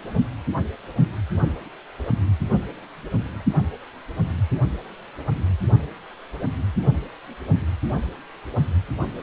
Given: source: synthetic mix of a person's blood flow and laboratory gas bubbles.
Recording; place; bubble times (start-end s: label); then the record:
Doppler ultrasound of blood flow; precordium
no bubbles
From the record:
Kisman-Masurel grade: 000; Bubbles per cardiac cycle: 0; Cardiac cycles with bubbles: 0%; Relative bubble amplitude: no bubbles discernible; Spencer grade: 0 (complete lack of bubble signals)